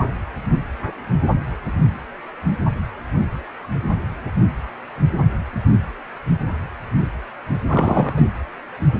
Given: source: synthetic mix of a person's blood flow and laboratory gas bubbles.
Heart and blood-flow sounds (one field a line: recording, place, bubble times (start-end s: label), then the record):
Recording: Doppler ultrasound of blood flow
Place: precordium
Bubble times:
7.69-8.28 s: bubbles
From the record:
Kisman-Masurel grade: 212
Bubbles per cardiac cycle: several, 3 to 8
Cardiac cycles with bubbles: 1 to 10%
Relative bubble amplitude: moderate (0.250 to 0.450)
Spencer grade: 1 (occasional bubble signal discernible with the cardiac motion signal, with majority of cardiac periods free of bubbles)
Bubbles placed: anywhere in the cardiac cycle